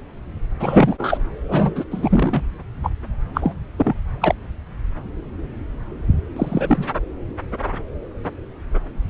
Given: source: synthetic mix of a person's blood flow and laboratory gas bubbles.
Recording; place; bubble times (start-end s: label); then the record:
Doppler ultrasound of blood flow; subclavian vein
0.59-0.96 s: bubbles
0.98-1.18 s: bubbles
1.48-1.72 s: bubbles
1.76-1.84 s: bubbles
1.91-2.43 s: bubbles
2.83-2.90 s: bubbles
3.34-3.54 s: bubbles
3.77-3.93 s: bubbles
4.20-4.34 s: bubbles
6.36-6.85 s: bubbles
From the record:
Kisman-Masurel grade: 223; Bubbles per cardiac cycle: several, 3 to 8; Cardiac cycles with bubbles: 10 to 50%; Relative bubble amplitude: loud (0.450 to 0.775); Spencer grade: 2 (many but less than half of the cardiac periods contain bubble signals, singularly or in groups); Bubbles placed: anywhere in the cardiac cycle